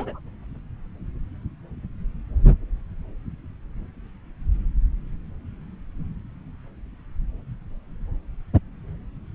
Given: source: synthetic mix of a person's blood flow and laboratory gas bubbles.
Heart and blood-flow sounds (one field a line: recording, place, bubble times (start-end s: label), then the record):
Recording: Doppler ultrasound of blood flow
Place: subclavian vein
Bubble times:
0.00-0.19 s: bubbles
From the record:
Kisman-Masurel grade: 221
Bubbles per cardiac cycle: several, 3 to 8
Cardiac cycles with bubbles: 10 to 50%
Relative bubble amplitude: barely perceptible (0.100 to 0.250)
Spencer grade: 2 (many but less than half of the cardiac periods contain bubble signals, singularly or in groups)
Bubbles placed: anywhere in the cardiac cycle